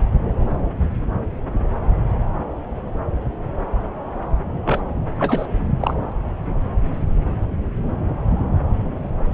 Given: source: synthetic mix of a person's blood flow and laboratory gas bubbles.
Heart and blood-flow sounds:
Doppler ultrasound of blood flow; subclavian vein
4.65-4.81 s: bubbles
5.20-5.46 s: bubbles
5.80-5.95 s: bubbles
From the record:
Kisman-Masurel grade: 212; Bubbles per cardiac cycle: several, 3 to 8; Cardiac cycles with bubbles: 1 to 10%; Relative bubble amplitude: moderate (0.250 to 0.450); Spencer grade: 1 (occasional bubble signal discernible with the cardiac motion signal, with majority of cardiac periods free of bubbles); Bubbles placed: anywhere in the cardiac cycle

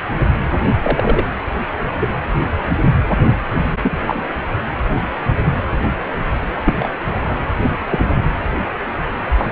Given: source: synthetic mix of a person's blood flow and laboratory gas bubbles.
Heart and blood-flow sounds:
Doppler ultrasound of blood flow; precordium
0.82-1.24 s: bubbles
2.01-2.09 s: bubbles
3.83-3.98 s: bubbles
4.07-4.23 s: bubbles
6.66-6.87 s: bubbles
7.21-7.34 s: bubbles
7.90-8.06 s: bubbles
9.38-9.52 s: bubbles
From the record:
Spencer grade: 2 (many but less than half of the cardiac periods contain bubble signals, singularly or in groups); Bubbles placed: anywhere in the cardiac cycle

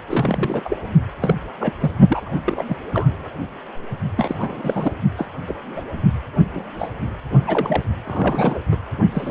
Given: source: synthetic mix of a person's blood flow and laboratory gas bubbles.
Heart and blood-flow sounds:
Doppler ultrasound of blood flow; precordium
0.08-0.77 s: bubbles
1.21-1.36 s: bubbles
1.60-1.73 s: bubbles
1.80-1.91 s: bubbles
2.07-2.30 s: bubbles
2.45-2.63 s: bubbles
2.68-2.76 s: bubbles
2.93-3.29 s: bubbles
4.17-4.35 s: bubbles
4.38-4.92 s: bubbles
5.17-5.27 s: bubbles
5.48-5.54 s: bubbles
5.76-5.82 s: bubbles
6.54-6.64 s: bubbles
6.79-6.90 s: bubbles
7.39-7.83 s: bubbles
8.05-8.60 s: bubbles
8.71-8.77 s: bubbles
9.12-9.31 s: bubbles
From the record:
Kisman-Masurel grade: 242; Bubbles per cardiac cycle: several, 3 to 8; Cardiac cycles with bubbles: 100%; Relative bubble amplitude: moderate (0.250 to 0.450); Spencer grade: 3 (all of the cardiac periods contain showers or single bubble signals, but not dominating or overriding the cardiac motion signals); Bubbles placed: only in the low amplitude regions of the cardiac cycle

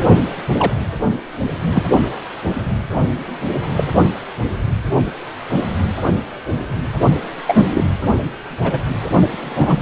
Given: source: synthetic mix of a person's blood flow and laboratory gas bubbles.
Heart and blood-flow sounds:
Doppler ultrasound of blood flow; precordium
0.57-0.72 s: bubbles
1.72-1.85 s: bubbles
3.76-3.84 s: bubbles
7.46-7.83 s: bubbles
8.63-8.79 s: bubbles
9.31-9.82 s: bubbles
From the record:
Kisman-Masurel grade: 123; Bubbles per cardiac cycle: 1 to 2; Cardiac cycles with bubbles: 10 to 50%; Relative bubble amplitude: loud (0.450 to 0.775); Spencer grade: 2 (many but less than half of the cardiac periods contain bubble signals, singularly or in groups); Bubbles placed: only in the low amplitude regions of the cardiac cycle

